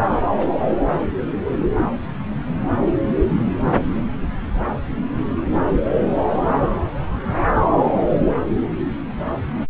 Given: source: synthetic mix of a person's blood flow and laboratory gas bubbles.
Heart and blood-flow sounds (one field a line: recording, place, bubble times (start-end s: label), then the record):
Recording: Doppler ultrasound of blood flow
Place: subclavian vein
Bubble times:
0.14-0.19 s: bubbles
0.37-0.46 s: bubbles
From the record:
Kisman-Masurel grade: 221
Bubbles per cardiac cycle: several, 3 to 8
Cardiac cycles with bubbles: 10 to 50%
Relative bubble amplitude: barely perceptible (0.100 to 0.250)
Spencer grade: 2 (many but less than half of the cardiac periods contain bubble signals, singularly or in groups)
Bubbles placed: anywhere in the cardiac cycle